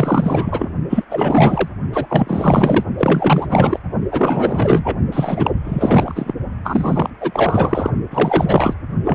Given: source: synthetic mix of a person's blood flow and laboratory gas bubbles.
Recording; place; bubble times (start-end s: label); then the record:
Doppler ultrasound of blood flow; precordium
0.00-0.72 s: bubbles
0.90-1.05 s: bubbles
1.10-1.69 s: bubbles
1.93-2.84 s: bubbles
2.98-3.79 s: bubbles
4.11-4.99 s: bubbles
5.12-5.51 s: bubbles
5.64-6.34 s: bubbles
6.63-7.10 s: bubbles
7.21-7.90 s: bubbles
8.10-8.74 s: bubbles
9.03-9.15 s: bubbles
From the record:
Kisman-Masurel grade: 444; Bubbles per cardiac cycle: continuous sound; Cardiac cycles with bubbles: 100%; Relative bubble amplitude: maximal (0.775 to 0.999); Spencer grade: 4 (maximum detectable bubble signal sounding continuously throughout systole and diastole of every cardiac period, and overriding the amplitude of the normal cardiac signals); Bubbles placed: only in the low amplitude regions of the cardiac cycle